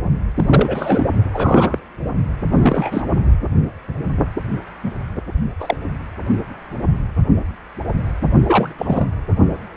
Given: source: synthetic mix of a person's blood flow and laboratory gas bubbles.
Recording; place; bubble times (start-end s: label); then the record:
Doppler ultrasound of blood flow; precordium
0.36-1.05 s: bubbles
1.33-1.78 s: bubbles
2.60-3.07 s: bubbles
4.83-4.92 s: bubbles
5.60-5.77 s: bubbles
8.46-8.74 s: bubbles
8.78-9.07 s: bubbles
From the record:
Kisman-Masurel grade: 232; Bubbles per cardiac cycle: several, 3 to 8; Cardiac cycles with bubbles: 50 to 99%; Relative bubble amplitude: moderate (0.250 to 0.450); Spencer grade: 3 (all of the cardiac periods contain showers or single bubble signals, but not dominating or overriding the cardiac motion signals); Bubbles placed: only in the low amplitude regions of the cardiac cycle